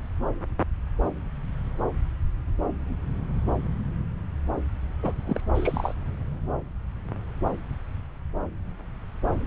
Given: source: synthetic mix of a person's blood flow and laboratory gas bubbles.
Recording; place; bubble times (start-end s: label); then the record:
Doppler ultrasound of blood flow; subclavian vein
5.03-5.12 s: bubbles
5.25-5.41 s: bubbles
5.55-5.94 s: bubbles
From the record:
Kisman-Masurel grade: 122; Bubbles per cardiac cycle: 1 to 2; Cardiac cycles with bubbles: 10 to 50%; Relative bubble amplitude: moderate (0.250 to 0.450); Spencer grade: 2 (many but less than half of the cardiac periods contain bubble signals, singularly or in groups); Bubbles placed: anywhere in the cardiac cycle